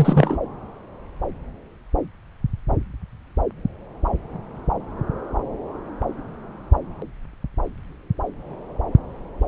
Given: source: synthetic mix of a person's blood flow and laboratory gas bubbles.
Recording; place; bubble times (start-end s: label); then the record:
Doppler ultrasound of blood flow; subclavian vein
0.00-0.38 s: bubbles
From the record:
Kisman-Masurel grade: 223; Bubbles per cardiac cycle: several, 3 to 8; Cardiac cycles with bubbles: 10 to 50%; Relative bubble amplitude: loud (0.450 to 0.775); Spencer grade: 2 (many but less than half of the cardiac periods contain bubble signals, singularly or in groups); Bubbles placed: anywhere in the cardiac cycle